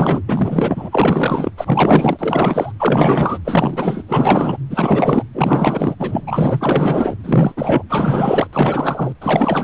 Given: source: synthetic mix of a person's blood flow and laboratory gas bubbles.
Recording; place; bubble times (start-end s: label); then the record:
Doppler ultrasound of blood flow; precordium
0.00-0.22 s: bubbles
0.27-1.51 s: bubbles
1.57-2.73 s: bubbles
2.79-3.38 s: bubbles
3.44-4.03 s: bubbles
4.08-4.58 s: bubbles
4.70-5.23 s: bubbles
5.33-5.95 s: bubbles
5.99-7.15 s: bubbles
7.24-7.82 s: bubbles
7.89-8.47 s: bubbles
8.53-9.12 s: bubbles
9.21-9.64 s: bubbles
From the record:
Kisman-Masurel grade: 444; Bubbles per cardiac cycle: continuous sound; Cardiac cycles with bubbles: 100%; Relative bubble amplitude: maximal (0.775 to 0.999); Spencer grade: 4 (maximum detectable bubble signal sounding continuously throughout systole and diastole of every cardiac period, and overriding the amplitude of the normal cardiac signals); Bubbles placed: anywhere in the cardiac cycle